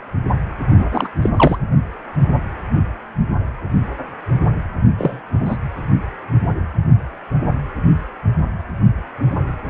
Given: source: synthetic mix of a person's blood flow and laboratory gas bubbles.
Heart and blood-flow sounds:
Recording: Doppler ultrasound of blood flow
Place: precordium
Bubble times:
0.78-0.88 s: bubbles
0.91-1.08 s: bubbles
1.21-1.29 s: bubbles
1.36-1.58 s: bubbles
4.98-5.21 s: bubbles
5.32-5.57 s: bubbles
From the record:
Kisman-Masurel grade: 223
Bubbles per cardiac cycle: several, 3 to 8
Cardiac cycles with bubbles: 10 to 50%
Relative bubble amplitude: loud (0.450 to 0.775)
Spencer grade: 2 (many but less than half of the cardiac periods contain bubble signals, singularly or in groups)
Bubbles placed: anywhere in the cardiac cycle

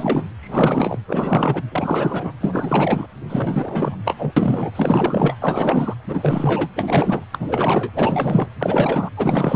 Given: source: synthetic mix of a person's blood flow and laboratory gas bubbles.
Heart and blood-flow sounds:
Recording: Doppler ultrasound of blood flow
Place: precordium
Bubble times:
0.00-0.25 s: bubbles
0.40-0.99 s: bubbles
1.08-1.62 s: bubbles
1.71-2.33 s: bubbles
2.40-3.06 s: bubbles
3.28-3.96 s: bubbles
4.04-4.33 s: bubbles
4.36-4.71 s: bubbles
4.75-5.37 s: bubbles
5.41-5.93 s: bubbles
6.05-6.68 s: bubbles
6.75-7.25 s: bubbles
7.32-7.92 s: bubbles
7.94-8.48 s: bubbles
8.59-9.10 s: bubbles
9.17-9.56 s: bubbles
From the record:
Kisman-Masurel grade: 444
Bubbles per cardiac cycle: continuous sound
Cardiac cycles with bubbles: 100%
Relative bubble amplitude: maximal (0.775 to 0.999)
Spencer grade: 4 (maximum detectable bubble signal sounding continuously throughout systole and diastole of every cardiac period, and overriding the amplitude of the normal cardiac signals)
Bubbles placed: anywhere in the cardiac cycle

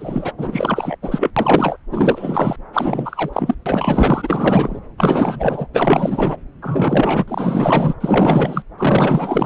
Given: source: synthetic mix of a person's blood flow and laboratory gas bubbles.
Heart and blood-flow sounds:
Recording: Doppler ultrasound of blood flow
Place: subclavian vein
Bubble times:
0.00-0.33 s: bubbles
0.38-0.95 s: bubbles
1.02-1.31 s: bubbles
1.36-1.77 s: bubbles
1.91-2.56 s: bubbles
2.73-3.54 s: bubbles
3.65-4.80 s: bubbles
4.98-5.67 s: bubbles
5.73-6.37 s: bubbles
6.62-7.25 s: bubbles
7.28-7.95 s: bubbles
8.00-8.63 s: bubbles
8.78-9.46 s: bubbles
From the record:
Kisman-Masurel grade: 444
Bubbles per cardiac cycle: continuous sound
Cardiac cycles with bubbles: 100%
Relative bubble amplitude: maximal (0.775 to 0.999)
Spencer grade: 4 (maximum detectable bubble signal sounding continuously throughout systole and diastole of every cardiac period, and overriding the amplitude of the normal cardiac signals)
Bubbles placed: anywhere in the cardiac cycle

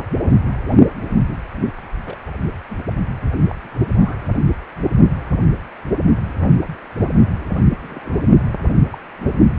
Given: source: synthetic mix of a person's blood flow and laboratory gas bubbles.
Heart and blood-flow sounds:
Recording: Doppler ultrasound of blood flow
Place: precordium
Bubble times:
2.06-2.17 s: bubbles
2.69-2.78 s: bubbles
3.50-3.54 s: bubbles
3.73-4.21 s: bubbles
7.82-8.22 s: bubbles
8.91-8.99 s: bubbles
From the record:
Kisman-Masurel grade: 121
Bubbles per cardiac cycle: 1 to 2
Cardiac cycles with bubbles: 10 to 50%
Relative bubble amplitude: barely perceptible (0.100 to 0.250)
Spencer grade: 2 (many but less than half of the cardiac periods contain bubble signals, singularly or in groups)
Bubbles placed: only in the low amplitude regions of the cardiac cycle

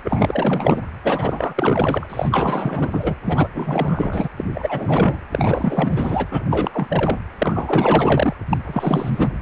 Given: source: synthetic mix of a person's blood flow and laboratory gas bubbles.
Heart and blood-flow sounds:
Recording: Doppler ultrasound of blood flow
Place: precordium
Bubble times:
0.04-0.81 s: bubbles
1.03-2.07 s: bubbles
2.09-3.15 s: bubbles
3.25-3.47 s: bubbles
3.54-4.27 s: bubbles
4.36-4.44 s: bubbles
4.54-5.18 s: bubbles
5.31-6.26 s: bubbles
6.30-7.19 s: bubbles
7.38-8.35 s: bubbles
8.50-8.58 s: bubbles
8.66-9.31 s: bubbles
From the record:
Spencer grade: 4 (maximum detectable bubble signal sounding continuously throughout systole and diastole of every cardiac period, and overriding the amplitude of the normal cardiac signals)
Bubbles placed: anywhere in the cardiac cycle

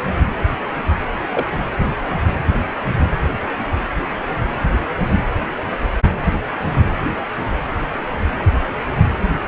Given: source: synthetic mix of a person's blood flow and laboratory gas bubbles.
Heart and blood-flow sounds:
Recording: Doppler ultrasound of blood flow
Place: precordium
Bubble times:
1.33-1.46 s: bubbles
1.52-1.60 s: bubbles
From the record:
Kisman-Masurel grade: 112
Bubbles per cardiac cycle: 1 to 2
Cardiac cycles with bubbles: 1 to 10%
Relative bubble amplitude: moderate (0.250 to 0.450)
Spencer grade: 1 (occasional bubble signal discernible with the cardiac motion signal, with majority of cardiac periods free of bubbles)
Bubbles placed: anywhere in the cardiac cycle

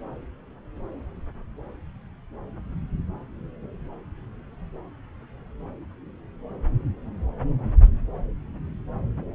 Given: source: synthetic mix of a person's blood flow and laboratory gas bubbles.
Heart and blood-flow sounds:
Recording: Doppler ultrasound of blood flow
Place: subclavian vein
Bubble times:
no bubbles
From the record:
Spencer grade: 0 (complete lack of bubble signals)

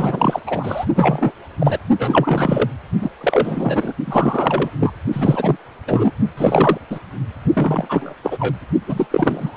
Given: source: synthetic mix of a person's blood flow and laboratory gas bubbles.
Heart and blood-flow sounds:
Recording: Doppler ultrasound of blood flow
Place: precordium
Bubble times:
0.00-0.40 s: bubbles
0.47-0.85 s: bubbles
0.96-1.32 s: bubbles
1.60-1.78 s: bubbles
1.99-2.70 s: bubbles
3.00-3.10 s: bubbles
3.20-3.93 s: bubbles
4.05-4.71 s: bubbles
4.80-4.92 s: bubbles
5.12-5.57 s: bubbles
5.87-6.12 s: bubbles
6.37-6.77 s: bubbles
6.90-6.99 s: bubbles
7.55-8.14 s: bubbles
8.24-8.57 s: bubbles
8.87-9.07 s: bubbles
9.11-9.57 s: bubbles
From the record:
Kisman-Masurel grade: 342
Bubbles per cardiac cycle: rolling drumbeat, 9 or more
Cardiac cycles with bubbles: 100%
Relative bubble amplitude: moderate (0.250 to 0.450)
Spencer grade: 3 (all of the cardiac periods contain showers or single bubble signals, but not dominating or overriding the cardiac motion signals)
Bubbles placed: only in the low amplitude regions of the cardiac cycle

